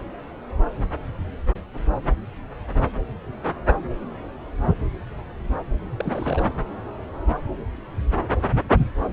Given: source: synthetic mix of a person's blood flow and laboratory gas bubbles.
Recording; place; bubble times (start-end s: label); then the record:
Doppler ultrasound of blood flow; subclavian vein
5.99-6.47 s: bubbles
From the record:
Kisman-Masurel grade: 211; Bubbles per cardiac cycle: several, 3 to 8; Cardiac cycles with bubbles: 1 to 10%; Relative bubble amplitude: barely perceptible (0.100 to 0.250); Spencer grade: 1 (occasional bubble signal discernible with the cardiac motion signal, with majority of cardiac periods free of bubbles); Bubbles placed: anywhere in the cardiac cycle